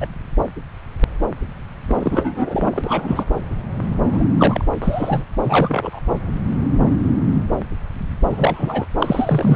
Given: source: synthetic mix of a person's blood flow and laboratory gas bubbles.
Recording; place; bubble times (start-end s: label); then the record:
Doppler ultrasound of blood flow; subclavian vein
0.00-0.06 s: bubbles
1.87-3.25 s: bubbles
4.04-4.25 s: bubbles
4.38-4.65 s: bubbles
4.81-5.24 s: bubbles
5.44-6.00 s: bubbles
8.29-8.85 s: bubbles
9.00-9.56 s: bubbles
From the record:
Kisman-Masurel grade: 222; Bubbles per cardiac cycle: several, 3 to 8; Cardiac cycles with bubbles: 10 to 50%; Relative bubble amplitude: moderate (0.250 to 0.450); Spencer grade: 2 (many but less than half of the cardiac periods contain bubble signals, singularly or in groups); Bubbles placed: anywhere in the cardiac cycle